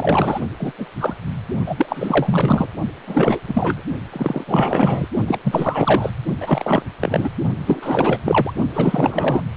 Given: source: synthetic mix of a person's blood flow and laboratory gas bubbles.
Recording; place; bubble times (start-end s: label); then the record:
Doppler ultrasound of blood flow; precordium
0.00-0.40 s: bubbles
0.59-0.72 s: bubbles
0.78-0.86 s: bubbles
0.99-1.14 s: bubbles
1.66-2.67 s: bubbles
3.07-3.40 s: bubbles
3.47-3.81 s: bubbles
4.12-4.45 s: bubbles
4.47-5.08 s: bubbles
5.27-5.39 s: bubbles
5.44-6.10 s: bubbles
6.41-6.83 s: bubbles
7.01-7.31 s: bubbles
7.67-8.53 s: bubbles
8.73-9.45 s: bubbles
From the record:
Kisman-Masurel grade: 444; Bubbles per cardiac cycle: continuous sound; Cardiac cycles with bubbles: 100%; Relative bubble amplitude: maximal (0.775 to 0.999); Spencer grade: 4 (maximum detectable bubble signal sounding continuously throughout systole and diastole of every cardiac period, and overriding the amplitude of the normal cardiac signals); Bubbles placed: only in the low amplitude regions of the cardiac cycle